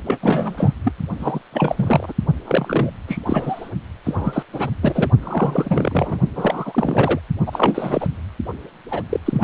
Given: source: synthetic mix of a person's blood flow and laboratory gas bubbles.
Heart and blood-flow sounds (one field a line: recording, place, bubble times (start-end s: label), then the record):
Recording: Doppler ultrasound of blood flow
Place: precordium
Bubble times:
0.05-0.73 s: bubbles
0.84-0.92 s: bubbles
1.19-1.40 s: bubbles
1.52-2.13 s: bubbles
2.45-2.91 s: bubbles
3.08-3.21 s: bubbles
3.25-3.70 s: bubbles
4.04-4.43 s: bubbles
4.52-4.70 s: bubbles
4.81-5.10 s: bubbles
5.22-6.17 s: bubbles
6.35-7.20 s: bubbles
7.46-8.07 s: bubbles
8.90-9.03 s: bubbles
9.09-9.20 s: bubbles
9.25-9.44 s: bubbles
From the record:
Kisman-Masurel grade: 343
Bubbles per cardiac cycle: rolling drumbeat, 9 or more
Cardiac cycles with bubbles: 100%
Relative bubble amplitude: loud (0.450 to 0.775)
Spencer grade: 3 (all of the cardiac periods contain showers or single bubble signals, but not dominating or overriding the cardiac motion signals)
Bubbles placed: only in the low amplitude regions of the cardiac cycle